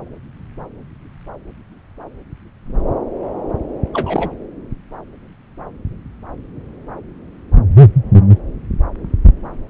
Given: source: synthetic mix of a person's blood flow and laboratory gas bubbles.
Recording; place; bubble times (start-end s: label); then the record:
Doppler ultrasound of blood flow; subclavian vein
3.93-4.30 s: bubbles
From the record:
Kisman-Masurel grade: 122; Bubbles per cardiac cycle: 1 to 2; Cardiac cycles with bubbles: 10 to 50%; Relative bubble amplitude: moderate (0.250 to 0.450); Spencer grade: 2 (many but less than half of the cardiac periods contain bubble signals, singularly or in groups); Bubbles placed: anywhere in the cardiac cycle